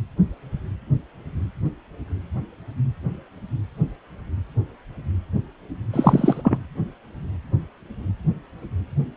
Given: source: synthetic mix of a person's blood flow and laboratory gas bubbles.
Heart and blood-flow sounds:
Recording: Doppler ultrasound of blood flow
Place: precordium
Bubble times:
5.93-6.58 s: bubbles
From the record:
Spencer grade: 1 (occasional bubble signal discernible with the cardiac motion signal, with majority of cardiac periods free of bubbles)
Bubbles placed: anywhere in the cardiac cycle

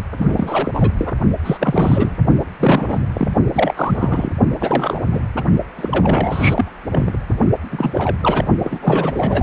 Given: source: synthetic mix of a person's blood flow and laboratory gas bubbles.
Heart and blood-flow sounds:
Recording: Doppler ultrasound of blood flow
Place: precordium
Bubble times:
0.19-0.72 s: bubbles
0.74-0.92 s: bubbles
0.98-1.14 s: bubbles
1.44-2.17 s: bubbles
2.60-3.04 s: bubbles
3.15-3.28 s: bubbles
3.54-4.30 s: bubbles
4.59-5.00 s: bubbles
5.12-5.20 s: bubbles
5.36-5.44 s: bubbles
5.76-6.72 s: bubbles
6.91-7.18 s: bubbles
7.71-8.16 s: bubbles
8.21-8.47 s: bubbles
8.59-9.43 s: bubbles
From the record:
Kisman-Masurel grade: 343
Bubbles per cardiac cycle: rolling drumbeat, 9 or more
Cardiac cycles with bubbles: 100%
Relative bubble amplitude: loud (0.450 to 0.775)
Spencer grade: 3 (all of the cardiac periods contain showers or single bubble signals, but not dominating or overriding the cardiac motion signals)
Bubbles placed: only in the low amplitude regions of the cardiac cycle

